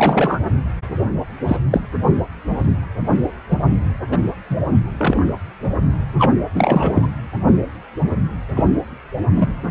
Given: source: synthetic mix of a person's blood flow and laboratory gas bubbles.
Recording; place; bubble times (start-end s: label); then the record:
Doppler ultrasound of blood flow; precordium
0.00-0.40 s: bubbles
1.48-1.57 s: bubbles
1.71-1.82 s: bubbles
3.48-3.58 s: bubbles
4.12-4.17 s: bubbles
4.50-4.58 s: bubbles
4.99-5.33 s: bubbles
6.18-6.33 s: bubbles
6.54-7.08 s: bubbles
8.55-8.64 s: bubbles
9.36-9.54 s: bubbles
From the record:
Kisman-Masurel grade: 233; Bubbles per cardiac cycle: several, 3 to 8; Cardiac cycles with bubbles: 50 to 99%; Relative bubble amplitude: loud (0.450 to 0.775); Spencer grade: 3 (all of the cardiac periods contain showers or single bubble signals, but not dominating or overriding the cardiac motion signals); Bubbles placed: anywhere in the cardiac cycle